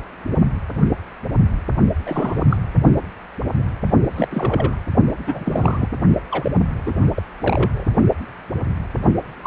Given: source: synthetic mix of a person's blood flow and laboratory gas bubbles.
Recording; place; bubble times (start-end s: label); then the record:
Doppler ultrasound of blood flow; precordium
2.06-2.43 s: bubbles
2.49-2.57 s: bubbles
4.15-4.28 s: bubbles
4.31-4.81 s: bubbles
5.27-5.88 s: bubbles
6.31-6.52 s: bubbles
6.69-6.98 s: bubbles
7.14-7.22 s: bubbles
7.40-7.85 s: bubbles
9.41-9.47 s: bubbles
From the record:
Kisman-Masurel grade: 232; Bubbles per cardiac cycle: several, 3 to 8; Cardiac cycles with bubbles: 50 to 99%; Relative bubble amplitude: moderate (0.250 to 0.450); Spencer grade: 3 (all of the cardiac periods contain showers or single bubble signals, but not dominating or overriding the cardiac motion signals); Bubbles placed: only in the low amplitude regions of the cardiac cycle